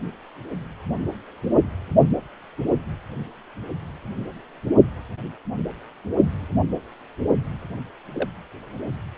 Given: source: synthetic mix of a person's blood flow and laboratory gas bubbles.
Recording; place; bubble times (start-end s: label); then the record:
Doppler ultrasound of blood flow; precordium
8.13-8.29 s: bubbles
From the record:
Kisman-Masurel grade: 111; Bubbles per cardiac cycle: 1 to 2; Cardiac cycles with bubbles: 1 to 10%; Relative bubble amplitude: barely perceptible (0.100 to 0.250); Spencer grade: 1 (occasional bubble signal discernible with the cardiac motion signal, with majority of cardiac periods free of bubbles); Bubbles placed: only in the low amplitude regions of the cardiac cycle